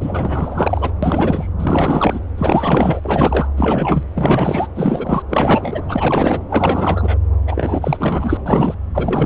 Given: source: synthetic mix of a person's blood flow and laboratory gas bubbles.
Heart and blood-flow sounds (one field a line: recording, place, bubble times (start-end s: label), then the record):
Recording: Doppler ultrasound of blood flow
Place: subclavian vein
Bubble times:
0.00-0.92 s: bubbles
1.03-1.52 s: bubbles
1.59-2.20 s: bubbles
2.38-3.00 s: bubbles
3.04-3.46 s: bubbles
3.56-4.03 s: bubbles
4.14-4.67 s: bubbles
4.75-5.22 s: bubbles
5.29-5.82 s: bubbles
5.88-6.39 s: bubbles
6.50-7.18 s: bubbles
7.47-8.38 s: bubbles
8.46-8.75 s: bubbles
8.94-9.26 s: bubbles
From the record:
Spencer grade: 4 (maximum detectable bubble signal sounding continuously throughout systole and diastole of every cardiac period, and overriding the amplitude of the normal cardiac signals)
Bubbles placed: anywhere in the cardiac cycle